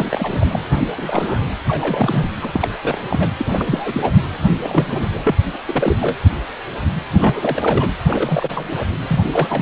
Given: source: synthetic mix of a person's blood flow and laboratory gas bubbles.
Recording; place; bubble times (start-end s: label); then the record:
Doppler ultrasound of blood flow; precordium
0.00-0.45 s: bubbles
0.48-0.59 s: bubbles
0.70-0.90 s: bubbles
0.96-1.46 s: bubbles
1.68-2.28 s: bubbles
2.42-2.69 s: bubbles
2.81-3.01 s: bubbles
3.10-3.29 s: bubbles
3.37-3.46 s: bubbles
3.51-4.10 s: bubbles
4.47-5.08 s: bubbles
5.13-5.35 s: bubbles
5.67-6.17 s: bubbles
7.18-7.90 s: bubbles
8.06-8.75 s: bubbles
9.07-9.20 s: bubbles
9.24-9.62 s: bubbles
From the record:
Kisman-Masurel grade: 332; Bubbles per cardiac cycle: rolling drumbeat, 9 or more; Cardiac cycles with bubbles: 50 to 99%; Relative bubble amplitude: moderate (0.250 to 0.450); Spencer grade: 3 (all of the cardiac periods contain showers or single bubble signals, but not dominating or overriding the cardiac motion signals); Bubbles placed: anywhere in the cardiac cycle